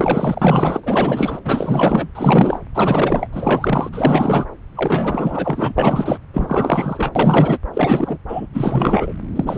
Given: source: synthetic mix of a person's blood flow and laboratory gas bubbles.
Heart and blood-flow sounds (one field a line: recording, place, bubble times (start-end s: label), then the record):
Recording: Doppler ultrasound of blood flow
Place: subclavian vein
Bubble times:
0.00-0.80 s: bubbles
0.83-1.40 s: bubbles
1.44-2.08 s: bubbles
2.15-2.60 s: bubbles
2.74-3.27 s: bubbles
3.33-3.90 s: bubbles
3.92-4.45 s: bubbles
4.75-5.74 s: bubbles
5.78-6.17 s: bubbles
6.33-7.12 s: bubbles
7.15-7.58 s: bubbles
7.74-8.17 s: bubbles
8.28-8.47 s: bubbles
8.52-9.12 s: bubbles
9.35-9.58 s: bubbles
From the record:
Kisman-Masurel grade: 444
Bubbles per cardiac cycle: continuous sound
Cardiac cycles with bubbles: 100%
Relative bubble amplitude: maximal (0.775 to 0.999)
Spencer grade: 4 (maximum detectable bubble signal sounding continuously throughout systole and diastole of every cardiac period, and overriding the amplitude of the normal cardiac signals)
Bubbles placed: anywhere in the cardiac cycle